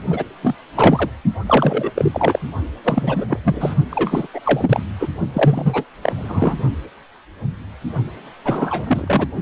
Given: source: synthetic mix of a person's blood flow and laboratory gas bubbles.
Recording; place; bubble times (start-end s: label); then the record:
Doppler ultrasound of blood flow; precordium
0.10-0.24 s: bubbles
0.42-0.55 s: bubbles
0.75-1.09 s: bubbles
1.46-1.90 s: bubbles
1.94-2.39 s: bubbles
2.84-3.40 s: bubbles
3.44-3.75 s: bubbles
3.90-4.27 s: bubbles
4.33-4.83 s: bubbles
4.99-5.07 s: bubbles
5.32-5.84 s: bubbles
6.01-6.57 s: bubbles
8.45-9.28 s: bubbles
From the record:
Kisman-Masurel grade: 333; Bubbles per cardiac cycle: rolling drumbeat, 9 or more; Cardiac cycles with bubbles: 50 to 99%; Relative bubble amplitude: loud (0.450 to 0.775); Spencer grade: 3 (all of the cardiac periods contain showers or single bubble signals, but not dominating or overriding the cardiac motion signals); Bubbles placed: only in the low amplitude regions of the cardiac cycle